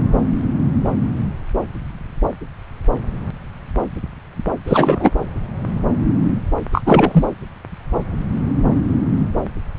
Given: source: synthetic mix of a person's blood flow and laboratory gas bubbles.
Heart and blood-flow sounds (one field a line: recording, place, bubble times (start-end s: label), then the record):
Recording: Doppler ultrasound of blood flow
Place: subclavian vein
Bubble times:
4.66-5.11 s: bubbles
6.73-6.82 s: bubbles
6.86-7.25 s: bubbles
From the record:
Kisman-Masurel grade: 213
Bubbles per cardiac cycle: several, 3 to 8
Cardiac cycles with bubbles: 1 to 10%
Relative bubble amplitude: loud (0.450 to 0.775)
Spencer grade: 1 (occasional bubble signal discernible with the cardiac motion signal, with majority of cardiac periods free of bubbles)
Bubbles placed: anywhere in the cardiac cycle